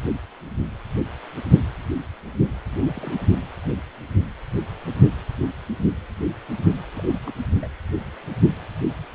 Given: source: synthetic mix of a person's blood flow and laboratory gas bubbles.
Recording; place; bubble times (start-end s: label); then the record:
Doppler ultrasound of blood flow; precordium
2.66-3.36 s: bubbles
6.96-7.32 s: bubbles
7.54-7.67 s: bubbles
From the record:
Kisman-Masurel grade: 211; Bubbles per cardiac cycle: several, 3 to 8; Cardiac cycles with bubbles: 1 to 10%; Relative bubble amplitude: barely perceptible (0.100 to 0.250); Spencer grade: 1 (occasional bubble signal discernible with the cardiac motion signal, with majority of cardiac periods free of bubbles); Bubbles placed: anywhere in the cardiac cycle